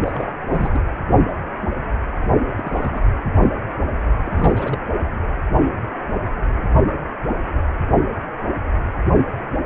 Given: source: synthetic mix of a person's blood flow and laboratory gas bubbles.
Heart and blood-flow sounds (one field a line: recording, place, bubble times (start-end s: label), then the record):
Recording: Doppler ultrasound of blood flow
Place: precordium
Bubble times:
0.00-0.31 s: bubbles
0.47-0.81 s: bubbles
2.57-3.03 s: bubbles
3.40-3.51 s: bubbles
4.24-4.80 s: bubbles
5.03-5.10 s: bubbles
From the record:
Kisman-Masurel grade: 221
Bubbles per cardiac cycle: several, 3 to 8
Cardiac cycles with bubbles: 10 to 50%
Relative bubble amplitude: barely perceptible (0.100 to 0.250)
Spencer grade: 2 (many but less than half of the cardiac periods contain bubble signals, singularly or in groups)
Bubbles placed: only in the low amplitude regions of the cardiac cycle